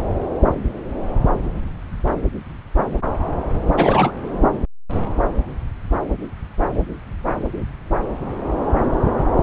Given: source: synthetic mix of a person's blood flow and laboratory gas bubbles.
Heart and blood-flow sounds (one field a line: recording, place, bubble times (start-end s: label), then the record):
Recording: Doppler ultrasound of blood flow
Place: subclavian vein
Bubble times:
3.76-4.12 s: bubbles
From the record:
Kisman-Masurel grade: 213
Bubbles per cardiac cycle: several, 3 to 8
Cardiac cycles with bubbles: 1 to 10%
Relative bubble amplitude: loud (0.450 to 0.775)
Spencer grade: 1 (occasional bubble signal discernible with the cardiac motion signal, with majority of cardiac periods free of bubbles)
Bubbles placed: anywhere in the cardiac cycle